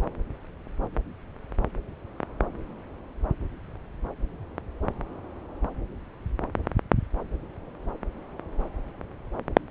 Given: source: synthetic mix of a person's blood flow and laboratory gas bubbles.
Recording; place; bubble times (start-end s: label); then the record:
Doppler ultrasound of blood flow; subclavian vein
no bubbles
From the record:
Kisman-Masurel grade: 000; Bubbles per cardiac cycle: 0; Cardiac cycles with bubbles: 0%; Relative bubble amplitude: no bubbles discernible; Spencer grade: 0 (complete lack of bubble signals)